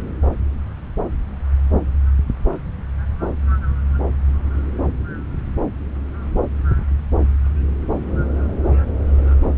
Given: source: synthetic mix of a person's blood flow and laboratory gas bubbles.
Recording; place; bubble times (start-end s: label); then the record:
Doppler ultrasound of blood flow; subclavian vein
no bubbles
From the record:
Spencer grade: 0 (complete lack of bubble signals)